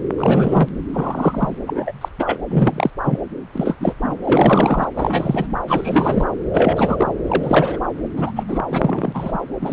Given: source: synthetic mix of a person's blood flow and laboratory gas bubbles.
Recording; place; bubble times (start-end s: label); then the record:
Doppler ultrasound of blood flow; subclavian vein
0.18-0.69 s: bubbles
0.93-1.56 s: bubbles
1.67-1.92 s: bubbles
2.01-2.08 s: bubbles
2.19-2.38 s: bubbles
2.49-2.90 s: bubbles
3.03-3.19 s: bubbles
3.53-3.75 s: bubbles
3.80-3.93 s: bubbles
4.02-4.15 s: bubbles
4.24-4.90 s: bubbles
4.96-5.46 s: bubbles
5.68-6.26 s: bubbles
6.53-7.14 s: bubbles
7.26-7.79 s: bubbles
8.16-8.31 s: bubbles
8.35-8.43 s: bubbles
8.47-8.59 s: bubbles
8.70-9.38 s: bubbles
9.61-9.73 s: bubbles
From the record:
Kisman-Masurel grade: 242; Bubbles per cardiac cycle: several, 3 to 8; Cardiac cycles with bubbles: 100%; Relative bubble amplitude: moderate (0.250 to 0.450); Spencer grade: 3 (all of the cardiac periods contain showers or single bubble signals, but not dominating or overriding the cardiac motion signals); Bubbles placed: anywhere in the cardiac cycle